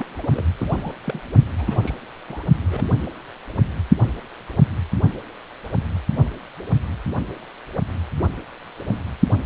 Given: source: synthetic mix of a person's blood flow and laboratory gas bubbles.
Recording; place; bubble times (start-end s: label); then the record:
Doppler ultrasound of blood flow; precordium
0.00-0.07 s: bubbles
0.09-0.44 s: bubbles
0.58-0.92 s: bubbles
1.04-1.20 s: bubbles
1.58-1.78 s: bubbles
1.81-1.95 s: bubbles
2.28-2.43 s: bubbles
2.56-2.62 s: bubbles
2.68-2.87 s: bubbles
From the record:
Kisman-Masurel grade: 221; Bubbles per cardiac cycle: several, 3 to 8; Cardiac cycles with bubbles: 10 to 50%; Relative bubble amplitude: barely perceptible (0.100 to 0.250); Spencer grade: 2 (many but less than half of the cardiac periods contain bubble signals, singularly or in groups); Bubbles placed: only in the low amplitude regions of the cardiac cycle